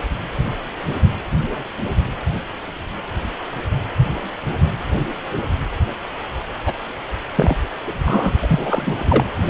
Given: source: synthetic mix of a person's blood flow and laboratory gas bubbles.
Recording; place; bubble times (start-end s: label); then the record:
Doppler ultrasound of blood flow; precordium
6.66-6.74 s: bubbles
7.35-7.57 s: bubbles
7.85-8.33 s: bubbles
8.41-9.24 s: bubbles
9.46-9.50 s: bubbles
From the record:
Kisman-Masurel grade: 222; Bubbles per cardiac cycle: several, 3 to 8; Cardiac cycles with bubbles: 10 to 50%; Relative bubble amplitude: moderate (0.250 to 0.450); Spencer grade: 2 (many but less than half of the cardiac periods contain bubble signals, singularly or in groups); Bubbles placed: anywhere in the cardiac cycle